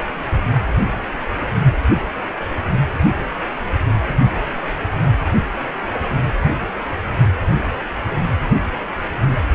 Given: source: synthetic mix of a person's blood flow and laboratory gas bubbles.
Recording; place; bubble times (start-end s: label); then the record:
Doppler ultrasound of blood flow; precordium
5.02-5.12 s: bubbles
From the record:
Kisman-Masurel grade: 111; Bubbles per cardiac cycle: 1 to 2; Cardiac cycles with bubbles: 1 to 10%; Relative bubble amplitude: barely perceptible (0.100 to 0.250); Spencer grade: 1 (occasional bubble signal discernible with the cardiac motion signal, with majority of cardiac periods free of bubbles); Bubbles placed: only in the low amplitude regions of the cardiac cycle